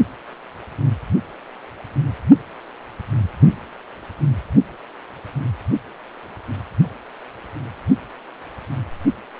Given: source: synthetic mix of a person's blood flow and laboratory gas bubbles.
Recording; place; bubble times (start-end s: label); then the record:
Doppler ultrasound of blood flow; precordium
no bubbles
From the record:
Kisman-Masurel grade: 000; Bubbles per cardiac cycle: 0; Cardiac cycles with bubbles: 0%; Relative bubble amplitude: no bubbles discernible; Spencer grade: 0 (complete lack of bubble signals)